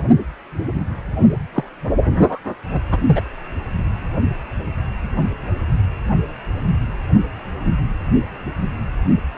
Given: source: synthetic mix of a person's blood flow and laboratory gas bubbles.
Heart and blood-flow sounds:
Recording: Doppler ultrasound of blood flow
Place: precordium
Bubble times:
1.55-1.64 s: bubbles
2.20-2.40 s: bubbles
2.71-2.82 s: bubbles
2.91-2.98 s: bubbles
3.06-3.21 s: bubbles
From the record:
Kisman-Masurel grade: 212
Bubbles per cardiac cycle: several, 3 to 8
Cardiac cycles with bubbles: 1 to 10%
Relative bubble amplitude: moderate (0.250 to 0.450)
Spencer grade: 1 (occasional bubble signal discernible with the cardiac motion signal, with majority of cardiac periods free of bubbles)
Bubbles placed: anywhere in the cardiac cycle

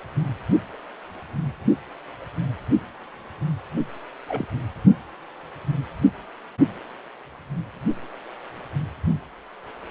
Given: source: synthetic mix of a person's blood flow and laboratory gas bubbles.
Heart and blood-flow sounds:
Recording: Doppler ultrasound of blood flow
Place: precordium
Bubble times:
4.28-4.48 s: bubbles
From the record:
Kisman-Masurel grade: 111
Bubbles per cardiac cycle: 1 to 2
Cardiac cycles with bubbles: 1 to 10%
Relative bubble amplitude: barely perceptible (0.100 to 0.250)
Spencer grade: 1 (occasional bubble signal discernible with the cardiac motion signal, with majority of cardiac periods free of bubbles)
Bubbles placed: only in the low amplitude regions of the cardiac cycle

